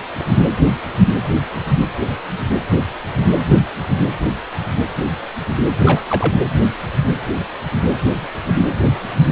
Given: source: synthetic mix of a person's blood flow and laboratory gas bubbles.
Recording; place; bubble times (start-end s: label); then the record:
Doppler ultrasound of blood flow; precordium
5.85-6.03 s: bubbles
6.09-6.36 s: bubbles
From the record:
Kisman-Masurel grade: 212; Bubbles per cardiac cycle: several, 3 to 8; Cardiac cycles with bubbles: 1 to 10%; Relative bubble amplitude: moderate (0.250 to 0.450); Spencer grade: 1 (occasional bubble signal discernible with the cardiac motion signal, with majority of cardiac periods free of bubbles); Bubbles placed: anywhere in the cardiac cycle